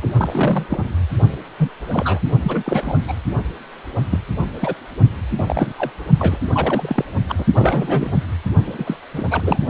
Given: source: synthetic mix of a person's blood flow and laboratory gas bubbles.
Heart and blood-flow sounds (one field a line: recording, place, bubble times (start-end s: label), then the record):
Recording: Doppler ultrasound of blood flow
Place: precordium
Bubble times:
0.02-0.08 s: bubbles
0.18-0.66 s: bubbles
0.68-0.90 s: bubbles
1.58-1.71 s: bubbles
1.92-2.19 s: bubbles
2.43-3.00 s: bubbles
3.08-3.14 s: bubbles
4.11-4.19 s: bubbles
4.60-4.74 s: bubbles
5.38-5.72 s: bubbles
5.78-5.91 s: bubbles
6.19-6.38 s: bubbles
6.52-7.03 s: bubbles
7.29-7.35 s: bubbles
7.38-7.45 s: bubbles
7.54-8.13 s: bubbles
8.67-8.96 s: bubbles
9.12-9.68 s: bubbles
From the record:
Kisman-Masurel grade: 242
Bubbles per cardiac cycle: several, 3 to 8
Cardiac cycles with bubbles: 100%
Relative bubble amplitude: moderate (0.250 to 0.450)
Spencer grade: 3 (all of the cardiac periods contain showers or single bubble signals, but not dominating or overriding the cardiac motion signals)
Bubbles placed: only in the low amplitude regions of the cardiac cycle